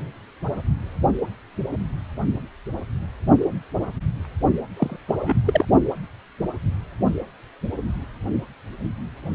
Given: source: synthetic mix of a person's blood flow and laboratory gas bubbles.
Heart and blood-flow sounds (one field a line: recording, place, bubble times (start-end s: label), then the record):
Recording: Doppler ultrasound of blood flow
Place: precordium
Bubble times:
4.76-4.96 s: bubbles
5.08-5.15 s: bubbles
5.18-5.34 s: bubbles
5.45-5.66 s: bubbles
From the record:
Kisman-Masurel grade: 212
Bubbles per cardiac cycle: several, 3 to 8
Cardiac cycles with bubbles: 1 to 10%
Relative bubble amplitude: moderate (0.250 to 0.450)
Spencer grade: 1 (occasional bubble signal discernible with the cardiac motion signal, with majority of cardiac periods free of bubbles)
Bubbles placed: only in the low amplitude regions of the cardiac cycle